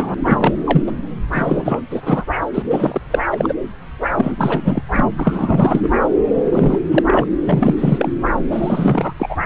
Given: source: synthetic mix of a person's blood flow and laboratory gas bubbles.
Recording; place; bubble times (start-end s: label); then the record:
Doppler ultrasound of blood flow; subclavian vein
0.00-0.14 s: bubbles
0.17-0.54 s: bubbles
0.66-0.82 s: bubbles
0.86-0.92 s: bubbles
1.32-1.80 s: bubbles
1.90-2.01 s: bubbles
2.05-2.25 s: bubbles
2.54-2.62 s: bubbles
2.69-3.01 s: bubbles
3.10-3.19 s: bubbles
3.30-3.53 s: bubbles
4.16-4.81 s: bubbles
4.92-5.04 s: bubbles
5.17-5.89 s: bubbles
6.35-6.79 s: bubbles
6.91-7.02 s: bubbles
7.06-7.26 s: bubbles
7.47-7.75 s: bubbles
7.78-8.12 s: bubbles
8.50-9.13 s: bubbles
9.19-9.37 s: bubbles
From the record:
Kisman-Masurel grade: 343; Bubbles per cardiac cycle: rolling drumbeat, 9 or more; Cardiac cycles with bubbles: 100%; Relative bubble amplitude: loud (0.450 to 0.775); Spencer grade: 3 (all of the cardiac periods contain showers or single bubble signals, but not dominating or overriding the cardiac motion signals); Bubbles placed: anywhere in the cardiac cycle